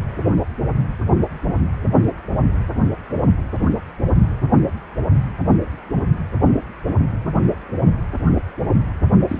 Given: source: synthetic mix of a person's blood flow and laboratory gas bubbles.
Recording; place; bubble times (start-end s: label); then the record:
Doppler ultrasound of blood flow; precordium
9.29-9.39 s: bubbles
From the record:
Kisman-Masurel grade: 112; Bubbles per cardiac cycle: 1 to 2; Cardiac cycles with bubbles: 1 to 10%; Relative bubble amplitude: moderate (0.250 to 0.450); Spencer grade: 1 (occasional bubble signal discernible with the cardiac motion signal, with majority of cardiac periods free of bubbles); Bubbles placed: anywhere in the cardiac cycle